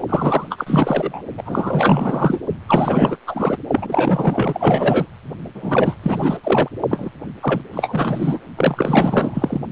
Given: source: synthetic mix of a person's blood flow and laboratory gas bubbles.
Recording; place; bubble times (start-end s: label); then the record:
Doppler ultrasound of blood flow; precordium
0.08-1.22 s: bubbles
1.38-2.40 s: bubbles
2.67-3.17 s: bubbles
3.27-3.56 s: bubbles
3.71-5.07 s: bubbles
5.54-5.97 s: bubbles
6.03-6.37 s: bubbles
6.43-6.69 s: bubbles
6.89-7.10 s: bubbles
7.41-7.62 s: bubbles
7.73-8.39 s: bubbles
8.57-9.60 s: bubbles
From the record:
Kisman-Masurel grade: 444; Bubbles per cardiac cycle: continuous sound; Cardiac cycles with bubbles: 100%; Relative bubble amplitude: maximal (0.775 to 0.999); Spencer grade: 4 (maximum detectable bubble signal sounding continuously throughout systole and diastole of every cardiac period, and overriding the amplitude of the normal cardiac signals); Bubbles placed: only in the low amplitude regions of the cardiac cycle